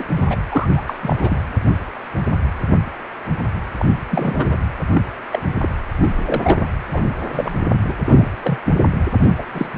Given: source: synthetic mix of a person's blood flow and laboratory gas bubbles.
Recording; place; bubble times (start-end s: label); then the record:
Doppler ultrasound of blood flow; precordium
0.00-0.06 s: bubbles
0.17-0.36 s: bubbles
0.43-0.95 s: bubbles
1.01-1.43 s: bubbles
3.79-3.90 s: bubbles
4.10-4.58 s: bubbles
4.93-5.01 s: bubbles
5.32-5.39 s: bubbles
5.60-5.70 s: bubbles
6.01-6.12 s: bubbles
6.17-6.67 s: bubbles
6.92-7.08 s: bubbles
7.32-7.55 s: bubbles
7.84-7.93 s: bubbles
8.05-8.29 s: bubbles
8.44-8.59 s: bubbles
8.65-8.74 s: bubbles
9.20-9.33 s: bubbles
9.38-9.45 s: bubbles
9.54-9.71 s: bubbles
From the record:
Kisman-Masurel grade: 232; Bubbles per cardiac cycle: several, 3 to 8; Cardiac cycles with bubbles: 50 to 99%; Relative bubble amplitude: moderate (0.250 to 0.450); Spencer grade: 3 (all of the cardiac periods contain showers or single bubble signals, but not dominating or overriding the cardiac motion signals); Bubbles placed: anywhere in the cardiac cycle